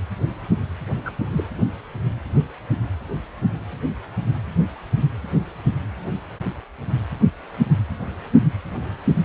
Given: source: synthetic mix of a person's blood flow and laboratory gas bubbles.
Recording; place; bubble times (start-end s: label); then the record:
Doppler ultrasound of blood flow; precordium
1.05-1.11 s: bubbles
1.32-1.45 s: bubbles
From the record:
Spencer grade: 2 (many but less than half of the cardiac periods contain bubble signals, singularly or in groups); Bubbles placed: anywhere in the cardiac cycle